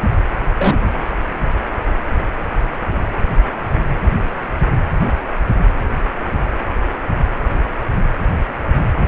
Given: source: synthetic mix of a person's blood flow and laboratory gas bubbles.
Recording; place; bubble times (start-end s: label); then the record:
Doppler ultrasound of blood flow; precordium
0.56-1.01 s: bubbles
From the record:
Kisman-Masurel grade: 113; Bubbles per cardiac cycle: 1 to 2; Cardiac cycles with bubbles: 1 to 10%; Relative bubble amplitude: loud (0.450 to 0.775); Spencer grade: 1 (occasional bubble signal discernible with the cardiac motion signal, with majority of cardiac periods free of bubbles); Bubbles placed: anywhere in the cardiac cycle